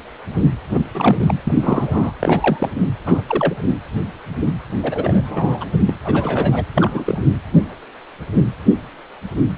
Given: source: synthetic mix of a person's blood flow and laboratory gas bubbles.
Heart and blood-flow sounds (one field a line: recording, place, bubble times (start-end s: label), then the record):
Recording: Doppler ultrasound of blood flow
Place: precordium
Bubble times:
0.71-0.82 s: bubbles
0.93-1.34 s: bubbles
1.47-2.12 s: bubbles
2.19-2.79 s: bubbles
3.06-3.22 s: bubbles
3.27-3.54 s: bubbles
4.82-5.65 s: bubbles
5.87-5.94 s: bubbles
6.04-6.65 s: bubbles
6.75-7.18 s: bubbles
From the record:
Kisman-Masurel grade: 222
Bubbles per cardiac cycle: several, 3 to 8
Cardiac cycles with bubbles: 10 to 50%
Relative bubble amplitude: moderate (0.250 to 0.450)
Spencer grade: 2 (many but less than half of the cardiac periods contain bubble signals, singularly or in groups)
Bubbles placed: anywhere in the cardiac cycle